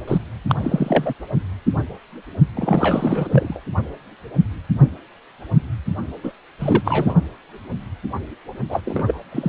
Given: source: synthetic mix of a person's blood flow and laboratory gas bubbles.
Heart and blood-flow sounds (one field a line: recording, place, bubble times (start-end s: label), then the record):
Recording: Doppler ultrasound of blood flow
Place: precordium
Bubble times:
0.07-0.18 s: bubbles
0.48-0.55 s: bubbles
0.59-1.14 s: bubbles
2.56-3.59 s: bubbles
6.23-6.32 s: bubbles
6.59-7.14 s: bubbles
8.69-8.81 s: bubbles
8.86-9.20 s: bubbles
9.32-9.49 s: bubbles
From the record:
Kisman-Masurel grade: 232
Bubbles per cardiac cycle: several, 3 to 8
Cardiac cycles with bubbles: 50 to 99%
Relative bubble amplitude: moderate (0.250 to 0.450)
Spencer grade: 3 (all of the cardiac periods contain showers or single bubble signals, but not dominating or overriding the cardiac motion signals)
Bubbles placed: only in the low amplitude regions of the cardiac cycle